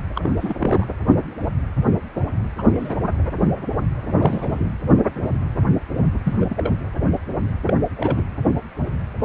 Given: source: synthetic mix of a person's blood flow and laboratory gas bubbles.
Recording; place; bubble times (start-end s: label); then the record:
Doppler ultrasound of blood flow; precordium
0.15-0.38 s: bubbles
0.41-0.55 s: bubbles
0.58-0.87 s: bubbles
2.57-2.95 s: bubbles
4.19-4.71 s: bubbles
6.24-6.37 s: bubbles
6.41-6.72 s: bubbles
7.67-7.74 s: bubbles
7.97-8.24 s: bubbles
From the record:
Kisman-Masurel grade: 221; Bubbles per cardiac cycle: several, 3 to 8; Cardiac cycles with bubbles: 10 to 50%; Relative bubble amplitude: barely perceptible (0.100 to 0.250); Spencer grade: 2 (many but less than half of the cardiac periods contain bubble signals, singularly or in groups); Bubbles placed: anywhere in the cardiac cycle